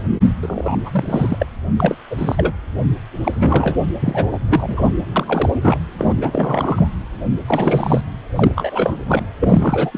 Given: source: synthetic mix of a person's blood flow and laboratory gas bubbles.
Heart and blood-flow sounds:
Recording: Doppler ultrasound of blood flow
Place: precordium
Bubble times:
0.42-1.46 s: bubbles
1.79-1.95 s: bubbles
2.10-2.16 s: bubbles
2.18-2.54 s: bubbles
3.24-3.77 s: bubbles
4.00-4.26 s: bubbles
4.31-4.38 s: bubbles
4.49-4.84 s: bubbles
5.16-5.54 s: bubbles
5.62-5.78 s: bubbles
5.98-6.88 s: bubbles
7.46-8.01 s: bubbles
8.36-8.95 s: bubbles
9.05-9.26 s: bubbles
9.40-9.98 s: bubbles
From the record:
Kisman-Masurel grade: 342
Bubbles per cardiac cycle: rolling drumbeat, 9 or more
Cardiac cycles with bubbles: 100%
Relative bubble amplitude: moderate (0.250 to 0.450)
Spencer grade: 3 (all of the cardiac periods contain showers or single bubble signals, but not dominating or overriding the cardiac motion signals)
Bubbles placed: anywhere in the cardiac cycle

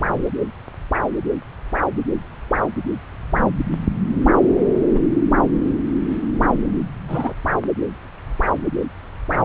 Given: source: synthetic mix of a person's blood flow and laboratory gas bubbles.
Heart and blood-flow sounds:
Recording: Doppler ultrasound of blood flow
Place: subclavian vein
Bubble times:
4.94-5.00 s: bubbles
7.08-7.33 s: bubbles
From the record:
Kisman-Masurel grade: 122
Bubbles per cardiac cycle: 1 to 2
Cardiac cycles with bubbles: 10 to 50%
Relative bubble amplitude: moderate (0.250 to 0.450)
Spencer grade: 2 (many but less than half of the cardiac periods contain bubble signals, singularly or in groups)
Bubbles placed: anywhere in the cardiac cycle

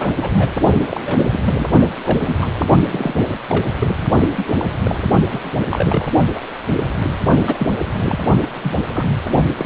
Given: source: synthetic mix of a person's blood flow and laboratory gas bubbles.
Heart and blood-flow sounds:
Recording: Doppler ultrasound of blood flow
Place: precordium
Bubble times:
0.00-0.12 s: bubbles
0.21-0.30 s: bubbles
0.37-0.50 s: bubbles
0.86-1.00 s: bubbles
1.05-1.40 s: bubbles
1.44-1.66 s: bubbles
2.06-2.38 s: bubbles
2.41-2.49 s: bubbles
2.87-3.29 s: bubbles
3.49-3.72 s: bubbles
3.79-4.07 s: bubbles
4.36-4.54 s: bubbles
4.58-4.67 s: bubbles
4.84-5.04 s: bubbles
5.29-5.50 s: bubbles
5.71-6.09 s: bubbles
6.35-6.40 s: bubbles
6.75-6.83 s: bubbles
7.01-7.14 s: bubbles
7.46-7.75 s: bubbles
7.85-7.93 s: bubbles
8.00-8.19 s: bubbles
8.41-8.47 s: bubbles
8.62-8.75 s: bubbles
8.91-9.05 s: bubbles
9.58-9.66 s: bubbles
From the record:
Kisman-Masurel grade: 242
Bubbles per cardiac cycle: several, 3 to 8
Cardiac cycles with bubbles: 100%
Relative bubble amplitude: moderate (0.250 to 0.450)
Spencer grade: 3 (all of the cardiac periods contain showers or single bubble signals, but not dominating or overriding the cardiac motion signals)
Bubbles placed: only in the low amplitude regions of the cardiac cycle

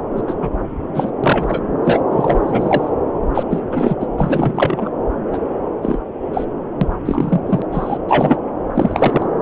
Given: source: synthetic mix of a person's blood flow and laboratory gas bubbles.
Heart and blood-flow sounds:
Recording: Doppler ultrasound of blood flow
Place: subclavian vein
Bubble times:
0.16-0.21 s: bubbles
0.27-0.35 s: bubbles
0.41-0.50 s: bubbles
0.94-1.10 s: bubbles
1.23-1.60 s: bubbles
1.84-2.02 s: bubbles
2.11-2.90 s: bubbles
3.34-3.44 s: bubbles
3.50-3.60 s: bubbles
3.71-4.07 s: bubbles
4.17-4.90 s: bubbles
5.33-5.39 s: bubbles
5.82-5.99 s: bubbles
6.33-6.45 s: bubbles
6.81-6.88 s: bubbles
7.05-7.41 s: bubbles
7.46-7.62 s: bubbles
7.72-7.98 s: bubbles
8.08-8.37 s: bubbles
8.75-9.26 s: bubbles
From the record:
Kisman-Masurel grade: 243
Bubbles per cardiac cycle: several, 3 to 8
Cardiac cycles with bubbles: 100%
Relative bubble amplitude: loud (0.450 to 0.775)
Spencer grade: 3 (all of the cardiac periods contain showers or single bubble signals, but not dominating or overriding the cardiac motion signals)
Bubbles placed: anywhere in the cardiac cycle

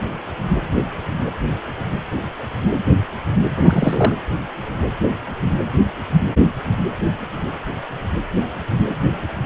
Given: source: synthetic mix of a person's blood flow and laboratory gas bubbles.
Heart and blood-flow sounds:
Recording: Doppler ultrasound of blood flow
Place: precordium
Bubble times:
3.58-4.14 s: bubbles
From the record:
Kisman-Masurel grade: 213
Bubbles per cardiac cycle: several, 3 to 8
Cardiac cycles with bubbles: 1 to 10%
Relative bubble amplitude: loud (0.450 to 0.775)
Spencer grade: 1 (occasional bubble signal discernible with the cardiac motion signal, with majority of cardiac periods free of bubbles)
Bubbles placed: anywhere in the cardiac cycle

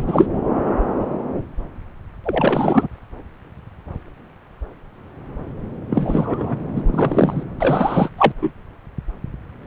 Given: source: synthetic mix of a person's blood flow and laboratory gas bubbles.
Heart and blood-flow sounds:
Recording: Doppler ultrasound of blood flow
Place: subclavian vein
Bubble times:
0.00-0.04 s: bubbles
0.07-0.27 s: bubbles
2.24-2.87 s: bubbles
5.89-6.61 s: bubbles
6.75-6.82 s: bubbles
6.86-7.43 s: bubbles
7.58-8.09 s: bubbles
8.17-8.32 s: bubbles
8.41-8.52 s: bubbles
From the record:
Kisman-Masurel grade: 223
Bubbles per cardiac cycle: several, 3 to 8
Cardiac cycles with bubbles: 10 to 50%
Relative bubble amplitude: loud (0.450 to 0.775)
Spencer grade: 2 (many but less than half of the cardiac periods contain bubble signals, singularly or in groups)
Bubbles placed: anywhere in the cardiac cycle

